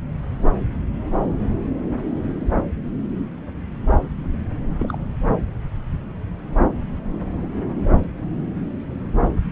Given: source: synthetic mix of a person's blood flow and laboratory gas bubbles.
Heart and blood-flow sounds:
Doppler ultrasound of blood flow; subclavian vein
4.79-4.97 s: bubbles
From the record:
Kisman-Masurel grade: 112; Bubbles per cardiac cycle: 1 to 2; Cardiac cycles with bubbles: 1 to 10%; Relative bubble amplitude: moderate (0.250 to 0.450); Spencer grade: 1 (occasional bubble signal discernible with the cardiac motion signal, with majority of cardiac periods free of bubbles); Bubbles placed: anywhere in the cardiac cycle

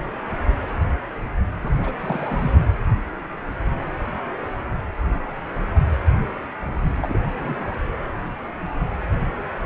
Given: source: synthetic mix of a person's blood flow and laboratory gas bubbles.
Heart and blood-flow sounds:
Doppler ultrasound of blood flow; precordium
1.62-1.71 s: bubbles
1.83-1.93 s: bubbles
2.00-2.52 s: bubbles
6.96-7.18 s: bubbles
7.32-7.72 s: bubbles
From the record:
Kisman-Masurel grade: 221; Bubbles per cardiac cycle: several, 3 to 8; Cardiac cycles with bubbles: 10 to 50%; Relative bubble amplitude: barely perceptible (0.100 to 0.250); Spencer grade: 2 (many but less than half of the cardiac periods contain bubble signals, singularly or in groups); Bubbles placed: only in the low amplitude regions of the cardiac cycle

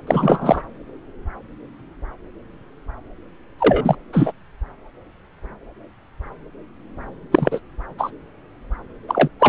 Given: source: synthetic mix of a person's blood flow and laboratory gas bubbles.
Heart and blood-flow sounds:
Doppler ultrasound of blood flow; subclavian vein
0.07-0.62 s: bubbles
3.58-3.95 s: bubbles
4.13-4.31 s: bubbles
7.32-7.60 s: bubbles
7.98-8.11 s: bubbles
9.07-9.29 s: bubbles
9.39-9.49 s: bubbles
From the record:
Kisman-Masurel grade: 223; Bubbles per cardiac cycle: several, 3 to 8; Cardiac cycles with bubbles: 10 to 50%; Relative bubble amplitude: loud (0.450 to 0.775); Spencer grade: 2 (many but less than half of the cardiac periods contain bubble signals, singularly or in groups); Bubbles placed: anywhere in the cardiac cycle

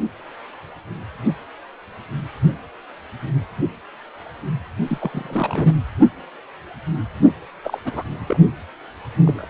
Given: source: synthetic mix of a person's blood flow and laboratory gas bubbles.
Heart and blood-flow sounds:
Doppler ultrasound of blood flow; precordium
4.88-4.98 s: bubbles
5.00-5.74 s: bubbles
7.63-7.79 s: bubbles
7.84-8.04 s: bubbles
8.27-8.40 s: bubbles
9.24-9.47 s: bubbles
From the record:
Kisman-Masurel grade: 221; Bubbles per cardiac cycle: several, 3 to 8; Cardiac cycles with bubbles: 10 to 50%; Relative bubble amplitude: barely perceptible (0.100 to 0.250); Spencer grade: 2 (many but less than half of the cardiac periods contain bubble signals, singularly or in groups); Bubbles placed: only in the low amplitude regions of the cardiac cycle

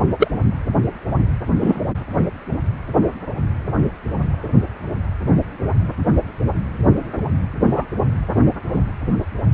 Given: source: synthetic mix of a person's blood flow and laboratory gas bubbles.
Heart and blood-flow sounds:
Doppler ultrasound of blood flow; precordium
0.19-0.28 s: bubbles
1.60-1.82 s: bubbles
7.65-7.85 s: bubbles
From the record:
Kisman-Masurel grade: 123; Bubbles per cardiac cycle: 1 to 2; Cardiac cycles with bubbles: 10 to 50%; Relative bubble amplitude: loud (0.450 to 0.775); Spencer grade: 2 (many but less than half of the cardiac periods contain bubble signals, singularly or in groups); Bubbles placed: anywhere in the cardiac cycle

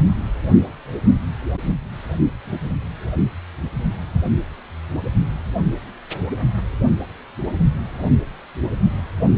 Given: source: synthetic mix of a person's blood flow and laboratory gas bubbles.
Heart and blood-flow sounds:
Doppler ultrasound of blood flow; precordium
no bubbles
From the record:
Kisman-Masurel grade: 000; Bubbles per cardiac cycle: 0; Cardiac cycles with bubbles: 0%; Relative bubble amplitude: no bubbles discernible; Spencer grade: 0 (complete lack of bubble signals)

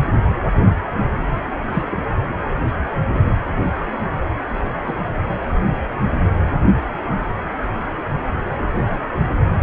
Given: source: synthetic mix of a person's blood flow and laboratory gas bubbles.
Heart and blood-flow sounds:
Doppler ultrasound of blood flow; precordium
1.72-1.98 s: bubbles
4.87-4.93 s: bubbles
5.56-5.60 s: bubbles
8.75-8.96 s: bubbles
From the record:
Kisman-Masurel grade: 122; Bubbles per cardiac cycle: 1 to 2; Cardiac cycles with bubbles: 10 to 50%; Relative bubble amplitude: moderate (0.250 to 0.450); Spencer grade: 2 (many but less than half of the cardiac periods contain bubble signals, singularly or in groups); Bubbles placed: anywhere in the cardiac cycle

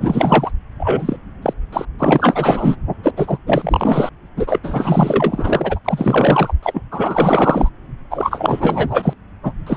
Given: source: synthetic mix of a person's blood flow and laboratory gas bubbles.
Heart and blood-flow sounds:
Doppler ultrasound of blood flow; subclavian vein
0.00-0.51 s: bubbles
0.79-1.17 s: bubbles
1.42-1.53 s: bubbles
1.72-1.85 s: bubbles
1.99-2.76 s: bubbles
3.03-3.11 s: bubbles
3.17-3.38 s: bubbles
3.47-4.09 s: bubbles
4.36-4.58 s: bubbles
4.63-5.79 s: bubbles
5.85-6.53 s: bubbles
6.62-6.82 s: bubbles
6.92-7.70 s: bubbles
8.10-9.13 s: bubbles
9.43-9.53 s: bubbles
9.67-9.77 s: bubbles
From the record:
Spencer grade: 4 (maximum detectable bubble signal sounding continuously throughout systole and diastole of every cardiac period, and overriding the amplitude of the normal cardiac signals); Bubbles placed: anywhere in the cardiac cycle

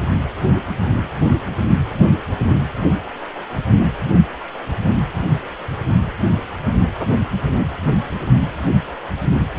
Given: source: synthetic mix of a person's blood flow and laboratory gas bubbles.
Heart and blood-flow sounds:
Doppler ultrasound of blood flow; precordium
7.46-7.52 s: bubbles
From the record:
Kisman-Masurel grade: 111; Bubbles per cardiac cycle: 1 to 2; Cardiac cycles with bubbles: 1 to 10%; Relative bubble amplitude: barely perceptible (0.100 to 0.250); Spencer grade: 1 (occasional bubble signal discernible with the cardiac motion signal, with majority of cardiac periods free of bubbles); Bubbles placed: anywhere in the cardiac cycle

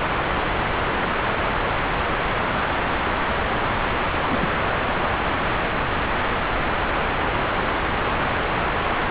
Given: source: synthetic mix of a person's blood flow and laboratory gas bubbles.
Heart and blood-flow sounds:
Doppler ultrasound of blood flow; subclavian vein
4.18-4.52 s: bubbles
From the record:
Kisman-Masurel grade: 211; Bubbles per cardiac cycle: several, 3 to 8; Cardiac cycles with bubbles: 1 to 10%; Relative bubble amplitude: barely perceptible (0.100 to 0.250); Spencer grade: 1 (occasional bubble signal discernible with the cardiac motion signal, with majority of cardiac periods free of bubbles); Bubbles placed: anywhere in the cardiac cycle

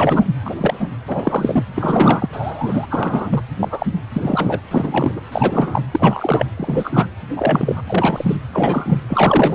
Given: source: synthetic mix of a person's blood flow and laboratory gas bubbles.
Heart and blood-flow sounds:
Doppler ultrasound of blood flow; precordium
0.00-0.25 s: bubbles
0.45-0.89 s: bubbles
1.07-1.64 s: bubbles
1.75-2.29 s: bubbles
2.33-2.87 s: bubbles
2.90-3.42 s: bubbles
3.59-3.86 s: bubbles
4.13-4.61 s: bubbles
4.71-5.21 s: bubbles
5.32-5.82 s: bubbles
5.91-6.46 s: bubbles
6.57-7.07 s: bubbles
7.36-7.82 s: bubbles
7.87-8.37 s: bubbles
8.53-9.02 s: bubbles
9.09-9.55 s: bubbles
From the record:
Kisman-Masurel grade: 233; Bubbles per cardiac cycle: several, 3 to 8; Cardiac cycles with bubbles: 50 to 99%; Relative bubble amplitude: loud (0.450 to 0.775); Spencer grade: 3 (all of the cardiac periods contain showers or single bubble signals, but not dominating or overriding the cardiac motion signals); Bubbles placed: anywhere in the cardiac cycle

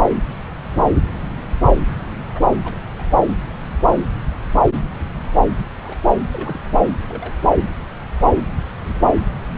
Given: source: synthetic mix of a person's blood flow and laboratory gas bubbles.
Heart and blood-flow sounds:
Doppler ultrasound of blood flow; subclavian vein
2.34-2.40 s: bubbles
2.64-2.75 s: bubbles
2.98-3.03 s: bubbles
5.83-5.96 s: bubbles
6.32-6.59 s: bubbles
7.08-7.33 s: bubbles
From the record:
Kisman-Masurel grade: 121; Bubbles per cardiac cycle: 1 to 2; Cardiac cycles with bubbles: 10 to 50%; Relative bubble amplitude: barely perceptible (0.100 to 0.250); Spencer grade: 2 (many but less than half of the cardiac periods contain bubble signals, singularly or in groups); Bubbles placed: anywhere in the cardiac cycle

